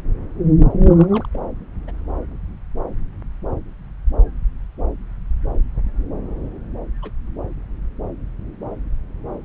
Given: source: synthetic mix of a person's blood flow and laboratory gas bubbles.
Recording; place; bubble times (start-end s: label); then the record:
Doppler ultrasound of blood flow; subclavian vein
0.88-1.25 s: bubbles
1.33-1.38 s: bubbles
1.88-1.91 s: bubbles
7.02-7.10 s: bubbles
From the record:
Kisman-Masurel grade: 121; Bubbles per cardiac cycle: 1 to 2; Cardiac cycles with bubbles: 10 to 50%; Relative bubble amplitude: barely perceptible (0.100 to 0.250); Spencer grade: 2 (many but less than half of the cardiac periods contain bubble signals, singularly or in groups); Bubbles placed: anywhere in the cardiac cycle